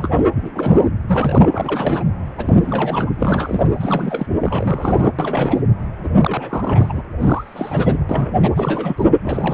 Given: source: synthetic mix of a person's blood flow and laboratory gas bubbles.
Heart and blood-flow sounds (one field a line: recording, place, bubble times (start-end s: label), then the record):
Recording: Doppler ultrasound of blood flow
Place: precordium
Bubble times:
0.00-0.24 s: bubbles
0.35-0.86 s: bubbles
1.07-1.49 s: bubbles
1.52-2.04 s: bubbles
2.37-3.11 s: bubbles
3.14-3.67 s: bubbles
3.76-4.26 s: bubbles
4.42-5.11 s: bubbles
5.18-5.61 s: bubbles
6.04-6.08 s: bubbles
6.16-7.02 s: bubbles
7.19-8.04 s: bubbles
8.09-8.49 s: bubbles
8.55-9.06 s: bubbles
9.23-9.54 s: bubbles
From the record:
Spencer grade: 3 (all of the cardiac periods contain showers or single bubble signals, but not dominating or overriding the cardiac motion signals)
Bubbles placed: anywhere in the cardiac cycle